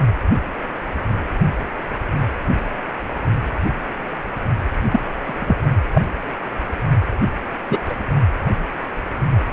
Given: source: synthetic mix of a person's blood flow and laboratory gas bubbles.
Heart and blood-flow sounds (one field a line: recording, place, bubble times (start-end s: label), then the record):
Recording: Doppler ultrasound of blood flow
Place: precordium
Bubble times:
4.91-5.00 s: bubbles
5.25-5.57 s: bubbles
5.95-6.01 s: bubbles
7.69-7.79 s: bubbles
7.88-7.96 s: bubbles
From the record:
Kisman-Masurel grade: 123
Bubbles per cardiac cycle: 1 to 2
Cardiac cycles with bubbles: 10 to 50%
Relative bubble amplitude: loud (0.450 to 0.775)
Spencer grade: 2 (many but less than half of the cardiac periods contain bubble signals, singularly or in groups)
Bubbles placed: only in the low amplitude regions of the cardiac cycle